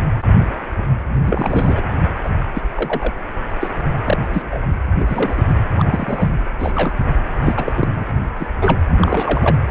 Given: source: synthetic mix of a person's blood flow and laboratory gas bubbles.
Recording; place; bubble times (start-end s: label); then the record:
Doppler ultrasound of blood flow; precordium
0.00-0.04 s: bubbles
1.23-1.82 s: bubbles
2.24-2.29 s: bubbles
2.54-2.62 s: bubbles
2.75-3.12 s: bubbles
3.61-3.67 s: bubbles
4.05-4.17 s: bubbles
4.33-4.67 s: bubbles
4.99-5.44 s: bubbles
5.76-6.29 s: bubbles
6.59-6.95 s: bubbles
7.41-7.72 s: bubbles
7.77-7.88 s: bubbles
7.95-8.04 s: bubbles
8.38-8.47 s: bubbles
8.62-8.80 s: bubbles
9.00-9.57 s: bubbles
9.68-9.71 s: bubbles
From the record:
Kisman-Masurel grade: 232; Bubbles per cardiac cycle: several, 3 to 8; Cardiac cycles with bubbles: 50 to 99%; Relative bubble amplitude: moderate (0.250 to 0.450); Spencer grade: 3 (all of the cardiac periods contain showers or single bubble signals, but not dominating or overriding the cardiac motion signals); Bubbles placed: anywhere in the cardiac cycle